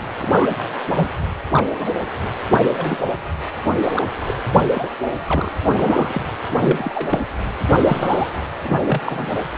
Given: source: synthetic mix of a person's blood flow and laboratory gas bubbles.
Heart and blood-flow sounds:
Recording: Doppler ultrasound of blood flow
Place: precordium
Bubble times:
0.20-0.56 s: bubbles
0.87-1.09 s: bubbles
1.54-1.66 s: bubbles
1.74-1.90 s: bubbles
2.74-2.99 s: bubbles
3.85-4.04 s: bubbles
4.26-4.35 s: bubbles
4.70-4.89 s: bubbles
5.25-5.49 s: bubbles
5.67-6.22 s: bubbles
6.61-7.21 s: bubbles
7.77-8.29 s: bubbles
8.62-8.81 s: bubbles
8.86-9.30 s: bubbles
From the record:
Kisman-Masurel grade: 242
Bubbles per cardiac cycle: several, 3 to 8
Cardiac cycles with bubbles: 100%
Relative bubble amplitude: moderate (0.250 to 0.450)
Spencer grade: 3 (all of the cardiac periods contain showers or single bubble signals, but not dominating or overriding the cardiac motion signals)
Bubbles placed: anywhere in the cardiac cycle

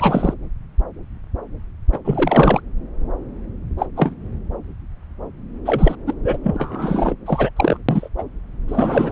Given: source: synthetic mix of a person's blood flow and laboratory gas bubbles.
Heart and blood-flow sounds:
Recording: Doppler ultrasound of blood flow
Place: subclavian vein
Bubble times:
0.00-0.34 s: bubbles
1.92-1.99 s: bubbles
2.04-2.61 s: bubbles
3.78-3.86 s: bubbles
3.96-4.15 s: bubbles
5.65-5.96 s: bubbles
6.06-6.15 s: bubbles
6.24-6.38 s: bubbles
6.43-7.14 s: bubbles
7.26-7.50 s: bubbles
7.57-7.78 s: bubbles
7.89-8.08 s: bubbles
8.18-8.23 s: bubbles
8.68-9.12 s: bubbles
From the record:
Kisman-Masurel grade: 233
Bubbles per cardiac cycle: several, 3 to 8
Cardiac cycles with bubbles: 50 to 99%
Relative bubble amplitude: loud (0.450 to 0.775)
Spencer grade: 3 (all of the cardiac periods contain showers or single bubble signals, but not dominating or overriding the cardiac motion signals)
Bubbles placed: anywhere in the cardiac cycle

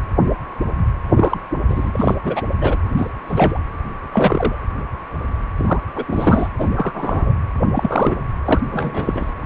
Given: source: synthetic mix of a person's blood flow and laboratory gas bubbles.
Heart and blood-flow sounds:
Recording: Doppler ultrasound of blood flow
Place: precordium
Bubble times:
1.16-1.38 s: bubbles
1.68-2.15 s: bubbles
2.23-2.42 s: bubbles
2.58-2.76 s: bubbles
2.97-3.08 s: bubbles
3.27-3.58 s: bubbles
4.12-4.56 s: bubbles
5.58-5.81 s: bubbles
5.95-6.49 s: bubbles
6.58-6.70 s: bubbles
6.75-7.33 s: bubbles
7.74-8.14 s: bubbles
8.45-8.60 s: bubbles
8.71-9.34 s: bubbles
9.42-9.45 s: bubbles
From the record:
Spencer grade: 3 (all of the cardiac periods contain showers or single bubble signals, but not dominating or overriding the cardiac motion signals)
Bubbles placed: anywhere in the cardiac cycle

